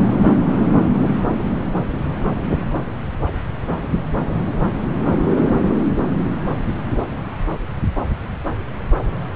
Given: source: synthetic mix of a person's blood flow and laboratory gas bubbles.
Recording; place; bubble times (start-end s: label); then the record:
Doppler ultrasound of blood flow; subclavian vein
no bubbles
From the record:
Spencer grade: 0 (complete lack of bubble signals)